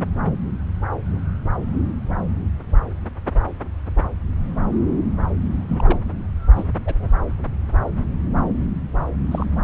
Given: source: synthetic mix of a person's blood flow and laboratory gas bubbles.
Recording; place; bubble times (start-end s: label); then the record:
Doppler ultrasound of blood flow; subclavian vein
5.69-5.98 s: bubbles
6.56-6.65 s: bubbles
6.85-6.97 s: bubbles
7.00-7.10 s: bubbles
9.31-9.46 s: bubbles
9.61-9.64 s: bubbles
From the record:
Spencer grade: 2 (many but less than half of the cardiac periods contain bubble signals, singularly or in groups); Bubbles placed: anywhere in the cardiac cycle